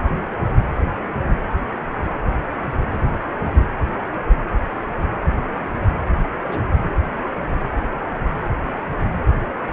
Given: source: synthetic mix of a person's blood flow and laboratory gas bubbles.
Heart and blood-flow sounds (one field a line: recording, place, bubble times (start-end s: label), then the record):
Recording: Doppler ultrasound of blood flow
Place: precordium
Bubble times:
2.89-3.17 s: bubbles
6.42-6.66 s: bubbles
8.67-8.82 s: bubbles
From the record:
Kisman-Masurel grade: 121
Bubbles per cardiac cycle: 1 to 2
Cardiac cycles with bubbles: 10 to 50%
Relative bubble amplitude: barely perceptible (0.100 to 0.250)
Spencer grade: 2 (many but less than half of the cardiac periods contain bubble signals, singularly or in groups)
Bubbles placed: anywhere in the cardiac cycle